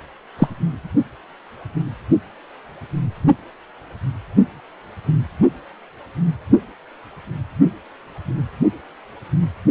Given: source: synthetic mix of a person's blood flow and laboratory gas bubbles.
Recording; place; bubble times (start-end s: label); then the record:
Doppler ultrasound of blood flow; precordium
0.39-0.48 s: bubbles
From the record:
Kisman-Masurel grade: 113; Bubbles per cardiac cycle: 1 to 2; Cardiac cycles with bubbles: 1 to 10%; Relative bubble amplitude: loud (0.450 to 0.775); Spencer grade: 1 (occasional bubble signal discernible with the cardiac motion signal, with majority of cardiac periods free of bubbles); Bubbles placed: only in the low amplitude regions of the cardiac cycle